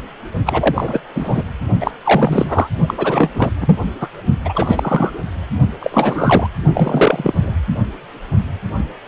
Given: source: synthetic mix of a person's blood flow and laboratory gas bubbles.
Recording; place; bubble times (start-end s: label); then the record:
Doppler ultrasound of blood flow; precordium
0.46-1.00 s: bubbles
1.14-1.43 s: bubbles
1.80-1.91 s: bubbles
2.04-2.68 s: bubbles
2.88-2.94 s: bubbles
2.97-3.31 s: bubbles
3.34-3.50 s: bubbles
3.61-3.77 s: bubbles
4.00-4.08 s: bubbles
4.45-5.19 s: bubbles
5.79-6.48 s: bubbles
6.74-7.54 s: bubbles
From the record:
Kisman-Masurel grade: 333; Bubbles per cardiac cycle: rolling drumbeat, 9 or more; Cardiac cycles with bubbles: 50 to 99%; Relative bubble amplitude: loud (0.450 to 0.775); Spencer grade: 3 (all of the cardiac periods contain showers or single bubble signals, but not dominating or overriding the cardiac motion signals); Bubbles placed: only in the low amplitude regions of the cardiac cycle